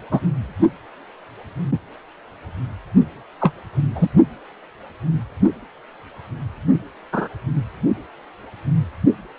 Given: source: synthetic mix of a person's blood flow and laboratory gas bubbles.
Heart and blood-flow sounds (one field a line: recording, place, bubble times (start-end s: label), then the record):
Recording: Doppler ultrasound of blood flow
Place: precordium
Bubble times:
0.11-0.20 s: bubbles
3.40-3.52 s: bubbles
3.95-4.08 s: bubbles
7.12-7.28 s: bubbles
From the record:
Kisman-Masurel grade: 123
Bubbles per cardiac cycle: 1 to 2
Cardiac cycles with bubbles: 10 to 50%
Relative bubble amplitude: loud (0.450 to 0.775)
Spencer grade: 2 (many but less than half of the cardiac periods contain bubble signals, singularly or in groups)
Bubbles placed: only in the low amplitude regions of the cardiac cycle